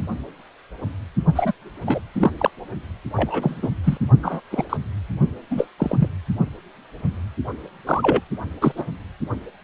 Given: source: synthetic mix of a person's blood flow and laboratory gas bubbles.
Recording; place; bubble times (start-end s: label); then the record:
Doppler ultrasound of blood flow; precordium
1.35-1.52 s: bubbles
1.86-2.01 s: bubbles
2.14-2.31 s: bubbles
2.39-2.50 s: bubbles
3.16-3.70 s: bubbles
3.83-3.98 s: bubbles
4.22-4.40 s: bubbles
4.50-4.64 s: bubbles
4.69-4.77 s: bubbles
5.50-5.67 s: bubbles
5.78-5.97 s: bubbles
5.99-6.08 s: bubbles
7.86-8.21 s: bubbles
8.61-8.72 s: bubbles
8.77-8.86 s: bubbles
From the record:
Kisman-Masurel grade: 232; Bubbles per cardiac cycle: several, 3 to 8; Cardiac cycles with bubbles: 50 to 99%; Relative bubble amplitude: moderate (0.250 to 0.450); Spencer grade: 3 (all of the cardiac periods contain showers or single bubble signals, but not dominating or overriding the cardiac motion signals); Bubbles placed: only in the low amplitude regions of the cardiac cycle